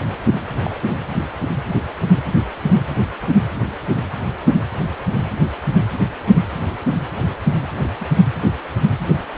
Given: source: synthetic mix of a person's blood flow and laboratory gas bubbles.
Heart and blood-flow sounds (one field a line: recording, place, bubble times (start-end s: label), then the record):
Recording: Doppler ultrasound of blood flow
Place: precordium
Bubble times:
0.64-0.77 s: bubbles
7.81-7.89 s: bubbles
8.00-8.05 s: bubbles
From the record:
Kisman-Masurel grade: 121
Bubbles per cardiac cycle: 1 to 2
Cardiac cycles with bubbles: 10 to 50%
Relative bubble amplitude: barely perceptible (0.100 to 0.250)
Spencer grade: 2 (many but less than half of the cardiac periods contain bubble signals, singularly or in groups)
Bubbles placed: anywhere in the cardiac cycle